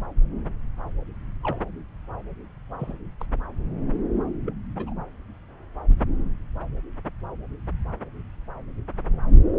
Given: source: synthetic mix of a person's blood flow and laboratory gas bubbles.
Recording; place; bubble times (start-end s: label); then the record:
Doppler ultrasound of blood flow; subclavian vein
1.44-1.61 s: bubbles
2.79-2.97 s: bubbles
3.20-3.26 s: bubbles
4.45-4.53 s: bubbles
4.76-4.93 s: bubbles
From the record:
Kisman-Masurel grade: 121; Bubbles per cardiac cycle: 1 to 2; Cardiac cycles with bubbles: 10 to 50%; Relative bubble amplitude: barely perceptible (0.100 to 0.250); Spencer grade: 2 (many but less than half of the cardiac periods contain bubble signals, singularly or in groups); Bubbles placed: anywhere in the cardiac cycle